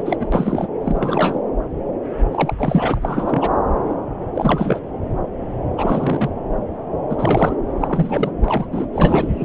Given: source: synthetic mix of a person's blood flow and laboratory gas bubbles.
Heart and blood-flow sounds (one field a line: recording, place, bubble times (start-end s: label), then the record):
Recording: Doppler ultrasound of blood flow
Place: subclavian vein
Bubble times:
0.00-0.17 s: bubbles
0.19-0.27 s: bubbles
0.32-0.69 s: bubbles
0.83-1.40 s: bubbles
2.31-3.51 s: bubbles
4.34-4.81 s: bubbles
5.77-6.30 s: bubbles
7.09-7.56 s: bubbles
7.80-8.31 s: bubbles
8.43-8.68 s: bubbles
8.71-8.86 s: bubbles
8.92-9.45 s: bubbles
From the record:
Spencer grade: 3 (all of the cardiac periods contain showers or single bubble signals, but not dominating or overriding the cardiac motion signals)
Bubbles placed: anywhere in the cardiac cycle